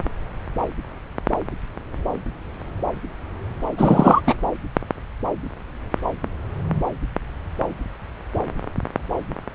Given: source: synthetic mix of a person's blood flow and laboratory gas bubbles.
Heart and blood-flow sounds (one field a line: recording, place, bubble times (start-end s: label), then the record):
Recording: Doppler ultrasound of blood flow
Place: subclavian vein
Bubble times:
3.77-4.21 s: bubbles
4.26-4.35 s: bubbles
From the record:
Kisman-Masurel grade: 213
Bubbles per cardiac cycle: several, 3 to 8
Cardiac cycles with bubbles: 1 to 10%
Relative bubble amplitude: loud (0.450 to 0.775)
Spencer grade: 1 (occasional bubble signal discernible with the cardiac motion signal, with majority of cardiac periods free of bubbles)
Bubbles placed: anywhere in the cardiac cycle